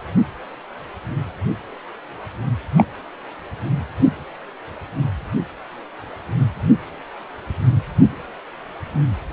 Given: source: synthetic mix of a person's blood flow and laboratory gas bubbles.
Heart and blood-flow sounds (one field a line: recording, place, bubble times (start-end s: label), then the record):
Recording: Doppler ultrasound of blood flow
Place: precordium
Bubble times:
2.76-2.85 s: bubbles
From the record:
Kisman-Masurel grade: 123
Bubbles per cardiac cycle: 1 to 2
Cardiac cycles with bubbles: 10 to 50%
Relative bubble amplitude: loud (0.450 to 0.775)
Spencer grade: 2 (many but less than half of the cardiac periods contain bubble signals, singularly or in groups)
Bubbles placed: anywhere in the cardiac cycle